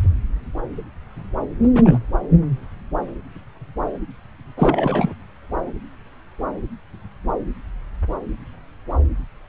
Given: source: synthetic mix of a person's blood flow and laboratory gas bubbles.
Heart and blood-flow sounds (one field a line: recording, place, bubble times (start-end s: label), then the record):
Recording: Doppler ultrasound of blood flow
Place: subclavian vein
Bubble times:
1.63-1.68 s: bubbles
1.74-1.99 s: bubbles
4.57-5.13 s: bubbles
From the record:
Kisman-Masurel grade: 212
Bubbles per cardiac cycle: several, 3 to 8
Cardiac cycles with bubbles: 1 to 10%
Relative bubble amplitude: moderate (0.250 to 0.450)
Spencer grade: 1 (occasional bubble signal discernible with the cardiac motion signal, with majority of cardiac periods free of bubbles)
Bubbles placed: anywhere in the cardiac cycle